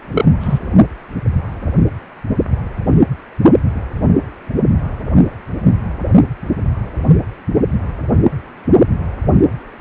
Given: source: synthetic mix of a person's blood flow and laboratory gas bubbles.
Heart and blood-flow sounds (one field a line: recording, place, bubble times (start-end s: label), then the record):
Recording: Doppler ultrasound of blood flow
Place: precordium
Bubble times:
0.12-0.25 s: bubbles
0.40-0.59 s: bubbles
From the record:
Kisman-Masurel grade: 213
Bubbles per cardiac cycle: several, 3 to 8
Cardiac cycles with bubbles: 1 to 10%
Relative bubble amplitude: loud (0.450 to 0.775)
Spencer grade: 1 (occasional bubble signal discernible with the cardiac motion signal, with majority of cardiac periods free of bubbles)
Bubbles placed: only in the low amplitude regions of the cardiac cycle